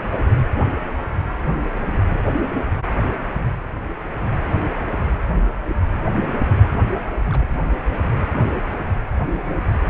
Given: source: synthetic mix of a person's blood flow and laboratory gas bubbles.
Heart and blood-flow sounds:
Doppler ultrasound of blood flow; precordium
6.50-6.60 s: bubbles
6.88-7.02 s: bubbles
7.26-7.46 s: bubbles
9.84-9.87 s: bubbles
From the record:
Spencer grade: 2 (many but less than half of the cardiac periods contain bubble signals, singularly or in groups); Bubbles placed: anywhere in the cardiac cycle

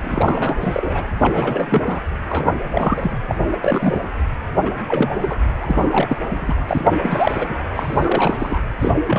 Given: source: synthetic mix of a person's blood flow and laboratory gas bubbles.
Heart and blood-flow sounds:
Doppler ultrasound of blood flow; precordium
0.03-0.57 s: bubbles
0.60-1.06 s: bubbles
1.19-2.02 s: bubbles
2.29-2.56 s: bubbles
2.75-3.18 s: bubbles
3.29-3.35 s: bubbles
3.51-3.57 s: bubbles
3.62-4.00 s: bubbles
4.62-4.73 s: bubbles
4.88-5.37 s: bubbles
5.61-6.66 s: bubbles
6.69-6.91 s: bubbles
7.02-7.54 s: bubbles
7.75-8.59 s: bubbles
8.79-8.93 s: bubbles
9.07-9.19 s: bubbles
From the record:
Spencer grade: 3 (all of the cardiac periods contain showers or single bubble signals, but not dominating or overriding the cardiac motion signals); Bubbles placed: anywhere in the cardiac cycle

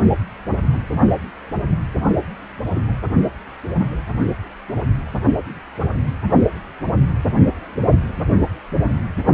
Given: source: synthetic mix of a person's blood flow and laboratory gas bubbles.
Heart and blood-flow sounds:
Doppler ultrasound of blood flow; precordium
8.17-8.23 s: bubbles
From the record:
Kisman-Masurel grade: 112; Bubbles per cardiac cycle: 1 to 2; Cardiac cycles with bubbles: 1 to 10%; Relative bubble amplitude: moderate (0.250 to 0.450); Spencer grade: 1 (occasional bubble signal discernible with the cardiac motion signal, with majority of cardiac periods free of bubbles); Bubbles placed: only in the low amplitude regions of the cardiac cycle

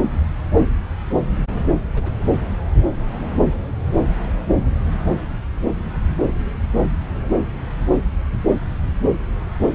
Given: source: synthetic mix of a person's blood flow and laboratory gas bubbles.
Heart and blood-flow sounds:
Doppler ultrasound of blood flow; subclavian vein
1.95-2.12 s: bubbles
2.92-2.98 s: bubbles
From the record:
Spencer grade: 1 (occasional bubble signal discernible with the cardiac motion signal, with majority of cardiac periods free of bubbles); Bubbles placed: anywhere in the cardiac cycle

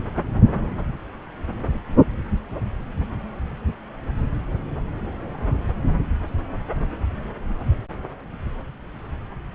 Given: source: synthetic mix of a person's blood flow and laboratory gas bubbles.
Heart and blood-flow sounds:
Doppler ultrasound of blood flow; subclavian vein
no bubbles
From the record:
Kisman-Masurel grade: 000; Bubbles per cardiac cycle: 0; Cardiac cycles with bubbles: 0%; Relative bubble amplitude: no bubbles discernible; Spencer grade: 0 (complete lack of bubble signals)

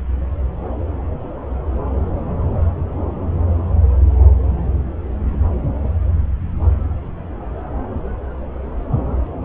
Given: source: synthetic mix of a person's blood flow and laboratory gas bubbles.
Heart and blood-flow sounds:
Doppler ultrasound of blood flow; subclavian vein
no bubbles
From the record:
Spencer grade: 0 (complete lack of bubble signals)

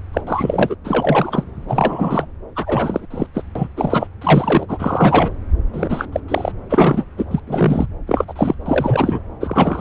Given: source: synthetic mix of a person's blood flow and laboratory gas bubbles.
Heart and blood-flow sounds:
Doppler ultrasound of blood flow; subclavian vein
0.13-0.21 s: bubbles
0.27-0.76 s: bubbles
0.84-1.44 s: bubbles
1.67-2.25 s: bubbles
2.55-3.06 s: bubbles
3.10-3.26 s: bubbles
3.34-3.42 s: bubbles
3.55-3.69 s: bubbles
3.76-4.07 s: bubbles
4.21-5.34 s: bubbles
5.73-6.07 s: bubbles
6.12-6.20 s: bubbles
6.28-6.52 s: bubbles
6.69-7.04 s: bubbles
7.17-7.25 s: bubbles
7.31-7.40 s: bubbles
7.47-7.86 s: bubbles
8.07-8.24 s: bubbles
8.27-8.54 s: bubbles
8.66-9.20 s: bubbles
9.40-9.81 s: bubbles
From the record:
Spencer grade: 3 (all of the cardiac periods contain showers or single bubble signals, but not dominating or overriding the cardiac motion signals); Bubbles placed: anywhere in the cardiac cycle

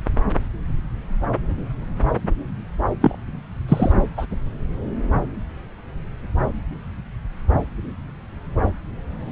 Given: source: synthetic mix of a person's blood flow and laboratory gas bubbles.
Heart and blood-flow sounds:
Doppler ultrasound of blood flow; subclavian vein
3.00-3.17 s: bubbles
3.68-3.92 s: bubbles
4.17-4.26 s: bubbles
From the record:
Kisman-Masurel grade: 123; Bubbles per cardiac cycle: 1 to 2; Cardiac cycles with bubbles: 10 to 50%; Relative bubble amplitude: loud (0.450 to 0.775); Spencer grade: 2 (many but less than half of the cardiac periods contain bubble signals, singularly or in groups); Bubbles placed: anywhere in the cardiac cycle

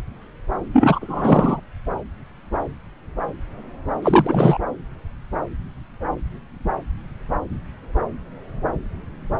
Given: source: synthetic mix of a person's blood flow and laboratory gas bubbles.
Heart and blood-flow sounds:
Doppler ultrasound of blood flow; subclavian vein
0.73-1.60 s: bubbles
4.02-4.58 s: bubbles
From the record:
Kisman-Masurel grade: 223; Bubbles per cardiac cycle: several, 3 to 8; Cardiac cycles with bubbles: 10 to 50%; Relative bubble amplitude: loud (0.450 to 0.775); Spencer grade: 2 (many but less than half of the cardiac periods contain bubble signals, singularly or in groups); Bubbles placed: anywhere in the cardiac cycle

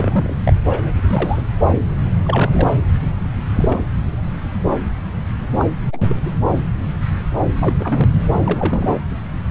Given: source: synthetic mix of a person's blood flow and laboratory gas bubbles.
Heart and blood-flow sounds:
Doppler ultrasound of blood flow; subclavian vein
0.00-0.36 s: bubbles
0.46-0.52 s: bubbles
0.69-0.93 s: bubbles
1.08-1.42 s: bubbles
2.25-2.69 s: bubbles
3.55-3.82 s: bubbles
5.59-5.65 s: bubbles
5.93-6.16 s: bubbles
6.25-6.31 s: bubbles
7.60-7.76 s: bubbles
7.80-8.09 s: bubbles
8.32-8.41 s: bubbles
8.44-8.93 s: bubbles
From the record:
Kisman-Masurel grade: 222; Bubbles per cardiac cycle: several, 3 to 8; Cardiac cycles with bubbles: 10 to 50%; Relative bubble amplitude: moderate (0.250 to 0.450); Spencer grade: 2 (many but less than half of the cardiac periods contain bubble signals, singularly or in groups); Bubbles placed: anywhere in the cardiac cycle

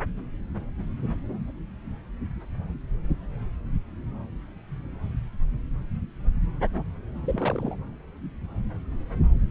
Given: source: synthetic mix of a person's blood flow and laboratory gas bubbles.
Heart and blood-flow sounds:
Doppler ultrasound of blood flow; subclavian vein
7.22-7.75 s: bubbles
From the record:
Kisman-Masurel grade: 211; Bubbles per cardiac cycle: several, 3 to 8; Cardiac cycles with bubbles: 1 to 10%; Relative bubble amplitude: barely perceptible (0.100 to 0.250); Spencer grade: 1 (occasional bubble signal discernible with the cardiac motion signal, with majority of cardiac periods free of bubbles); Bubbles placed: anywhere in the cardiac cycle

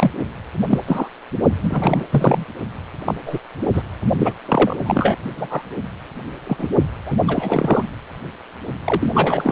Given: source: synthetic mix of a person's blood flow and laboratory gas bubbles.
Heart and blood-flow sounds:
Doppler ultrasound of blood flow; precordium
0.00-0.11 s: bubbles
0.70-0.79 s: bubbles
0.86-1.08 s: bubbles
1.62-2.04 s: bubbles
2.10-2.44 s: bubbles
3.06-3.14 s: bubbles
3.25-3.39 s: bubbles
3.74-3.83 s: bubbles
4.18-4.33 s: bubbles
4.46-4.77 s: bubbles
4.86-5.18 s: bubbles
5.31-5.65 s: bubbles
6.46-6.67 s: bubbles
7.06-7.16 s: bubbles
7.27-7.84 s: bubbles
8.84-9.52 s: bubbles
From the record:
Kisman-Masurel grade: 243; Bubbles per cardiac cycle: several, 3 to 8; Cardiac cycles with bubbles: 100%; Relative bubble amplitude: loud (0.450 to 0.775); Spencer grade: 3 (all of the cardiac periods contain showers or single bubble signals, but not dominating or overriding the cardiac motion signals); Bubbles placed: only in the low amplitude regions of the cardiac cycle

